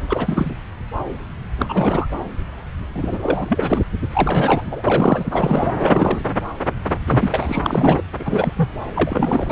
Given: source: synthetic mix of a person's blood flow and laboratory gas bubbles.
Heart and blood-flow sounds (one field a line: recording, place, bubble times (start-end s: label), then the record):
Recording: Doppler ultrasound of blood flow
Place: subclavian vein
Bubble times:
0.08-0.51 s: bubbles
1.57-2.08 s: bubbles
2.94-3.88 s: bubbles
4.09-5.71 s: bubbles
5.77-6.19 s: bubbles
7.06-8.04 s: bubbles
8.20-8.54 s: bubbles
8.56-8.71 s: bubbles
8.95-9.52 s: bubbles
From the record:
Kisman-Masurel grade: 333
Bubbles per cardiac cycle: rolling drumbeat, 9 or more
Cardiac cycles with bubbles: 50 to 99%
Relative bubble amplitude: loud (0.450 to 0.775)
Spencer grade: 3 (all of the cardiac periods contain showers or single bubble signals, but not dominating or overriding the cardiac motion signals)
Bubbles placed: anywhere in the cardiac cycle